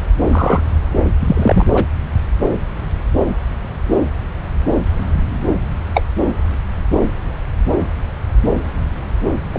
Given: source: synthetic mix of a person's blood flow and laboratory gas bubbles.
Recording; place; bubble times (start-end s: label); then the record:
Doppler ultrasound of blood flow; subclavian vein
0.32-0.63 s: bubbles
1.20-1.66 s: bubbles
1.73-1.86 s: bubbles
5.94-6.02 s: bubbles
9.52-9.59 s: bubbles
From the record:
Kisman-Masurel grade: 123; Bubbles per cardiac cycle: 1 to 2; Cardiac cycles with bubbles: 10 to 50%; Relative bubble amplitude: loud (0.450 to 0.775); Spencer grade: 2 (many but less than half of the cardiac periods contain bubble signals, singularly or in groups); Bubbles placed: anywhere in the cardiac cycle